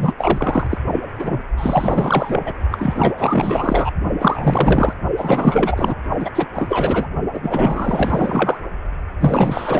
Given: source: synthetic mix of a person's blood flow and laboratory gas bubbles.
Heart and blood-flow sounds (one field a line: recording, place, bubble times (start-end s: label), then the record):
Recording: Doppler ultrasound of blood flow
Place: precordium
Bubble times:
0.00-0.13 s: bubbles
0.17-0.67 s: bubbles
0.70-0.78 s: bubbles
0.93-1.00 s: bubbles
1.19-1.41 s: bubbles
1.57-2.54 s: bubbles
2.71-3.15 s: bubbles
3.17-3.91 s: bubbles
4.18-4.94 s: bubbles
5.17-5.94 s: bubbles
6.19-6.31 s: bubbles
6.35-6.46 s: bubbles
6.54-7.07 s: bubbles
7.33-7.40 s: bubbles
7.43-8.60 s: bubbles
9.20-9.80 s: bubbles
From the record:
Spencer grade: 4 (maximum detectable bubble signal sounding continuously throughout systole and diastole of every cardiac period, and overriding the amplitude of the normal cardiac signals)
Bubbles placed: only in the low amplitude regions of the cardiac cycle